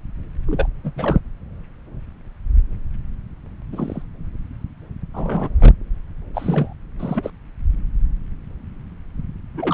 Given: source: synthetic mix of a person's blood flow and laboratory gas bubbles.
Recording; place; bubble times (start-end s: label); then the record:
Doppler ultrasound of blood flow; subclavian vein
0.47-0.69 s: bubbles
0.83-0.92 s: bubbles
0.96-1.20 s: bubbles
3.72-4.02 s: bubbles
5.14-5.50 s: bubbles
5.60-5.73 s: bubbles
6.34-6.73 s: bubbles
6.99-7.30 s: bubbles
9.54-9.74 s: bubbles
From the record:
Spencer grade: 2 (many but less than half of the cardiac periods contain bubble signals, singularly or in groups); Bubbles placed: anywhere in the cardiac cycle